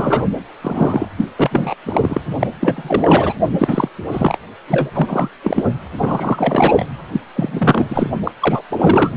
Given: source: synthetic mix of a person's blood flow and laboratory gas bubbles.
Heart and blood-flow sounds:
Doppler ultrasound of blood flow; precordium
0.00-0.23 s: bubbles
0.61-1.08 s: bubbles
1.16-1.25 s: bubbles
1.37-1.75 s: bubbles
1.85-2.21 s: bubbles
2.39-2.47 s: bubbles
2.60-3.33 s: bubbles
3.58-3.89 s: bubbles
4.11-4.38 s: bubbles
4.68-4.91 s: bubbles
4.94-5.29 s: bubbles
5.44-5.64 s: bubbles
5.86-5.88 s: bubbles
5.98-6.86 s: bubbles
7.12-7.20 s: bubbles
7.36-8.10 s: bubbles
8.24-8.31 s: bubbles
8.40-8.62 s: bubbles
8.70-9.12 s: bubbles
From the record:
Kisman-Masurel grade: 343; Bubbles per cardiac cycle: rolling drumbeat, 9 or more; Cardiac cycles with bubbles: 100%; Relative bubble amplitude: loud (0.450 to 0.775); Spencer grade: 3 (all of the cardiac periods contain showers or single bubble signals, but not dominating or overriding the cardiac motion signals); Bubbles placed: anywhere in the cardiac cycle

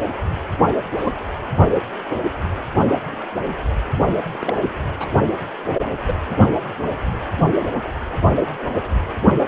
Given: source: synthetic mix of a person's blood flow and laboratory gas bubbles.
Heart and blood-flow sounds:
Doppler ultrasound of blood flow; precordium
0.97-1.12 s: bubbles
4.23-4.62 s: bubbles
5.00-5.09 s: bubbles
6.07-6.14 s: bubbles
From the record:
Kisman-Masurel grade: 122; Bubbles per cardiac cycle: 1 to 2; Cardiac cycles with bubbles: 10 to 50%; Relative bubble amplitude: moderate (0.250 to 0.450); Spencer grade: 2 (many but less than half of the cardiac periods contain bubble signals, singularly or in groups); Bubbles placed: only in the low amplitude regions of the cardiac cycle

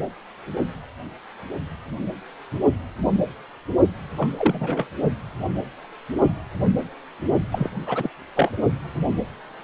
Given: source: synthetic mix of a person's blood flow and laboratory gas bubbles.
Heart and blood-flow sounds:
Doppler ultrasound of blood flow; precordium
4.18-4.32 s: bubbles
4.37-4.88 s: bubbles
7.52-7.70 s: bubbles
7.86-8.09 s: bubbles
8.35-8.51 s: bubbles
From the record:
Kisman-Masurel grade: 222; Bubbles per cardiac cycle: several, 3 to 8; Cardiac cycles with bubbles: 10 to 50%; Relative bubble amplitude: moderate (0.250 to 0.450); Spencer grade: 2 (many but less than half of the cardiac periods contain bubble signals, singularly or in groups); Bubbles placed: only in the low amplitude regions of the cardiac cycle

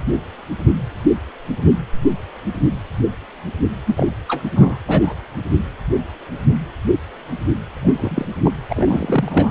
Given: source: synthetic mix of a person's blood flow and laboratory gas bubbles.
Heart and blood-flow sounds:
Doppler ultrasound of blood flow; precordium
3.87-4.12 s: bubbles
4.29-4.42 s: bubbles
4.55-4.78 s: bubbles
4.88-5.15 s: bubbles
7.83-8.26 s: bubbles
8.45-8.51 s: bubbles
8.70-9.51 s: bubbles
From the record:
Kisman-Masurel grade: 222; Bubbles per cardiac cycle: several, 3 to 8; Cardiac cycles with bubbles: 10 to 50%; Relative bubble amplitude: moderate (0.250 to 0.450); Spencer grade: 2 (many but less than half of the cardiac periods contain bubble signals, singularly or in groups); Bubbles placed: anywhere in the cardiac cycle

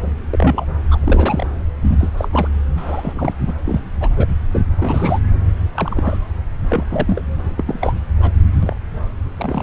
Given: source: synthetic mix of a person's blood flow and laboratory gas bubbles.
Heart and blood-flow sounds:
Doppler ultrasound of blood flow; subclavian vein
0.00-0.07 s: bubbles
0.32-0.66 s: bubbles
0.91-0.99 s: bubbles
1.02-1.46 s: bubbles
1.82-2.09 s: bubbles
2.17-2.28 s: bubbles
2.32-2.48 s: bubbles
2.76-3.33 s: bubbles
3.46-3.54 s: bubbles
3.64-3.79 s: bubbles
4.00-4.08 s: bubbles
4.16-4.27 s: bubbles
4.52-4.65 s: bubbles
4.77-5.19 s: bubbles
5.75-6.19 s: bubbles
6.68-6.84 s: bubbles
6.91-7.21 s: bubbles
7.55-7.93 s: bubbles
8.21-8.32 s: bubbles
8.62-8.76 s: bubbles
9.38-9.63 s: bubbles
From the record:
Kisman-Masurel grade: 242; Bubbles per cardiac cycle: several, 3 to 8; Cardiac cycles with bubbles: 100%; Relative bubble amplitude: moderate (0.250 to 0.450); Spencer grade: 3 (all of the cardiac periods contain showers or single bubble signals, but not dominating or overriding the cardiac motion signals); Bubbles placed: anywhere in the cardiac cycle

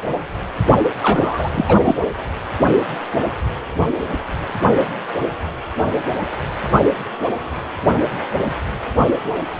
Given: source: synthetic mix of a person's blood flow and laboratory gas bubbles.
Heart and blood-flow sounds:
Doppler ultrasound of blood flow; precordium
1.02-1.95 s: bubbles
From the record:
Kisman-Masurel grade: 213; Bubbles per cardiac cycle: several, 3 to 8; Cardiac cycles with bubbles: 1 to 10%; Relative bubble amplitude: loud (0.450 to 0.775); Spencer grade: 1 (occasional bubble signal discernible with the cardiac motion signal, with majority of cardiac periods free of bubbles); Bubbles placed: anywhere in the cardiac cycle

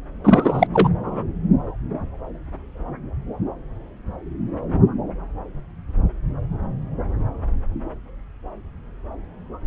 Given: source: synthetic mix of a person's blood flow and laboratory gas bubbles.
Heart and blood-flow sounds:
Doppler ultrasound of blood flow; subclavian vein
0.24-0.67 s: bubbles
0.73-0.89 s: bubbles
1.05-1.24 s: bubbles
From the record:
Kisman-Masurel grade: 213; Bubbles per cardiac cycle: several, 3 to 8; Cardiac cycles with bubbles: 1 to 10%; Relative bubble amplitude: loud (0.450 to 0.775); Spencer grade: 1 (occasional bubble signal discernible with the cardiac motion signal, with majority of cardiac periods free of bubbles); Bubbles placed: anywhere in the cardiac cycle

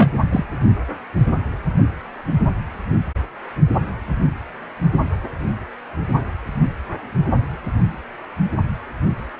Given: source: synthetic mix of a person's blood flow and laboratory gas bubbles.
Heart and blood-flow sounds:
Doppler ultrasound of blood flow; precordium
0.00-0.09 s: bubbles
0.31-0.44 s: bubbles
From the record:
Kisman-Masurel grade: 223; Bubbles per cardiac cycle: several, 3 to 8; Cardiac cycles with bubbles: 10 to 50%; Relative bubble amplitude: loud (0.450 to 0.775); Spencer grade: 2 (many but less than half of the cardiac periods contain bubble signals, singularly or in groups); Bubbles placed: anywhere in the cardiac cycle

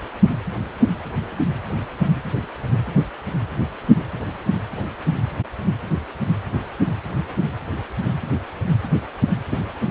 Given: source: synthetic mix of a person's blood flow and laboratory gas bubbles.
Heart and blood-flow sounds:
Doppler ultrasound of blood flow; precordium
9.51-9.59 s: bubbles
From the record:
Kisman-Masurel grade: 112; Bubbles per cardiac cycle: 1 to 2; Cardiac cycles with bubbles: 1 to 10%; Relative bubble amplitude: moderate (0.250 to 0.450); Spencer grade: 1 (occasional bubble signal discernible with the cardiac motion signal, with majority of cardiac periods free of bubbles); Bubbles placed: anywhere in the cardiac cycle

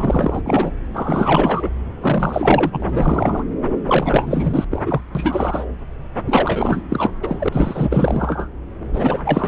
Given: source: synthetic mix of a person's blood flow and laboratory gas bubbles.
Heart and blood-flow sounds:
Doppler ultrasound of blood flow; subclavian vein
0.00-0.42 s: bubbles
0.44-0.71 s: bubbles
0.94-1.71 s: bubbles
2.00-3.44 s: bubbles
3.85-4.65 s: bubbles
4.71-4.82 s: bubbles
4.85-5.01 s: bubbles
5.15-5.66 s: bubbles
6.25-6.81 s: bubbles
6.89-7.11 s: bubbles
7.22-7.49 s: bubbles
7.52-8.48 s: bubbles
8.93-9.48 s: bubbles
From the record:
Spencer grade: 4 (maximum detectable bubble signal sounding continuously throughout systole and diastole of every cardiac period, and overriding the amplitude of the normal cardiac signals); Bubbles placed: anywhere in the cardiac cycle

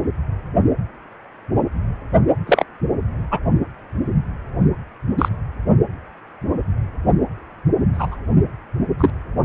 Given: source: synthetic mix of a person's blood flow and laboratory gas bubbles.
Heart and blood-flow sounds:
Doppler ultrasound of blood flow; precordium
2.46-2.64 s: bubbles
3.31-3.39 s: bubbles
5.18-5.29 s: bubbles
7.94-8.18 s: bubbles
8.97-9.12 s: bubbles
From the record:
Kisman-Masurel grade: 123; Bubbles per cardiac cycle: 1 to 2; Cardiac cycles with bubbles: 10 to 50%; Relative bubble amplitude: loud (0.450 to 0.775); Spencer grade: 2 (many but less than half of the cardiac periods contain bubble signals, singularly or in groups); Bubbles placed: only in the low amplitude regions of the cardiac cycle

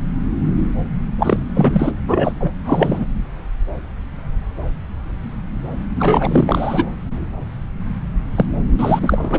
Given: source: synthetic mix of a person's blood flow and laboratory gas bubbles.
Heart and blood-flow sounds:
Doppler ultrasound of blood flow; subclavian vein
1.18-1.42 s: bubbles
1.54-1.92 s: bubbles
2.07-2.32 s: bubbles
2.40-2.52 s: bubbles
2.65-3.06 s: bubbles
5.96-6.85 s: bubbles
8.36-8.46 s: bubbles
8.79-9.39 s: bubbles
From the record:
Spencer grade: 3 (all of the cardiac periods contain showers or single bubble signals, but not dominating or overriding the cardiac motion signals); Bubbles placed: anywhere in the cardiac cycle

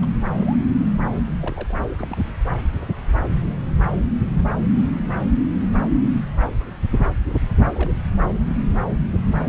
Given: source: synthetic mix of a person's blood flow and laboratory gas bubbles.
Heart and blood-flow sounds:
Doppler ultrasound of blood flow; subclavian vein
0.02-0.05 s: bubbles
0.37-0.56 s: bubbles
1.41-1.73 s: bubbles
1.98-2.34 s: bubbles
7.74-8.03 s: bubbles
From the record:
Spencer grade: 2 (many but less than half of the cardiac periods contain bubble signals, singularly or in groups); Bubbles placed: anywhere in the cardiac cycle

